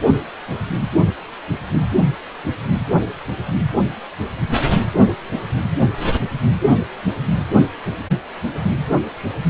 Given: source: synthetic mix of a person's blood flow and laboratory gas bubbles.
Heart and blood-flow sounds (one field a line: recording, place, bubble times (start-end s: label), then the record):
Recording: Doppler ultrasound of blood flow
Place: precordium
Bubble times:
no bubbles
From the record:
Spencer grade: 0 (complete lack of bubble signals)